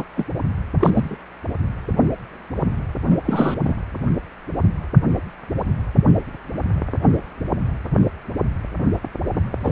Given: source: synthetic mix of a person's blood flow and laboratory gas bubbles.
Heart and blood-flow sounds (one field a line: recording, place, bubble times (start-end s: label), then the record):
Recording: Doppler ultrasound of blood flow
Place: precordium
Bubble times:
0.00-0.05 s: bubbles
0.16-0.26 s: bubbles
0.80-0.90 s: bubbles
0.93-1.17 s: bubbles
3.09-3.17 s: bubbles
3.25-3.59 s: bubbles
3.65-3.75 s: bubbles
9.61-9.71 s: bubbles
From the record:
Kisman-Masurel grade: 222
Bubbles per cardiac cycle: several, 3 to 8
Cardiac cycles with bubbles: 10 to 50%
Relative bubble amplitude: moderate (0.250 to 0.450)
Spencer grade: 2 (many but less than half of the cardiac periods contain bubble signals, singularly or in groups)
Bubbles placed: anywhere in the cardiac cycle